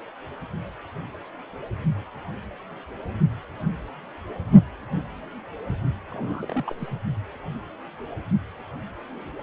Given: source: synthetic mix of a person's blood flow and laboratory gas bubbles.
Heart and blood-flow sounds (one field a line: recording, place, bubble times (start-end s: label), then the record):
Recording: Doppler ultrasound of blood flow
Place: precordium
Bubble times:
6.09-6.64 s: bubbles
6.67-6.73 s: bubbles
6.79-6.88 s: bubbles
From the record:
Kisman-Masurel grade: 211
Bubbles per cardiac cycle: several, 3 to 8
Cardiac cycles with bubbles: 1 to 10%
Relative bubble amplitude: barely perceptible (0.100 to 0.250)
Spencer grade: 1 (occasional bubble signal discernible with the cardiac motion signal, with majority of cardiac periods free of bubbles)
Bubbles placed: only in the low amplitude regions of the cardiac cycle